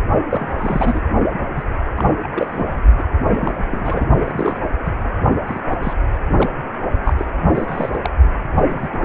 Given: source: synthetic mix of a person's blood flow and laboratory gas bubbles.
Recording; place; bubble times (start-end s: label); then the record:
Doppler ultrasound of blood flow; precordium
0.30-1.01 s: bubbles
1.55-1.64 s: bubbles
1.96-2.04 s: bubbles
2.23-2.29 s: bubbles
2.35-2.81 s: bubbles
2.98-3.03 s: bubbles
3.25-3.53 s: bubbles
3.71-4.09 s: bubbles
4.17-4.59 s: bubbles
4.85-4.91 s: bubbles
5.46-5.61 s: bubbles
5.71-5.76 s: bubbles
5.82-5.93 s: bubbles
6.37-6.50 s: bubbles
7.04-7.13 s: bubbles
7.18-7.25 s: bubbles
7.55-7.99 s: bubbles
8.01-8.10 s: bubbles
8.54-8.64 s: bubbles
8.68-8.88 s: bubbles
8.93-8.98 s: bubbles
9.02-9.05 s: bubbles
From the record:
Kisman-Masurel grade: 242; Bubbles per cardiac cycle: several, 3 to 8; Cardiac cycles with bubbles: 100%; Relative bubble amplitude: moderate (0.250 to 0.450); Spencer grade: 3 (all of the cardiac periods contain showers or single bubble signals, but not dominating or overriding the cardiac motion signals); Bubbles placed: only in the low amplitude regions of the cardiac cycle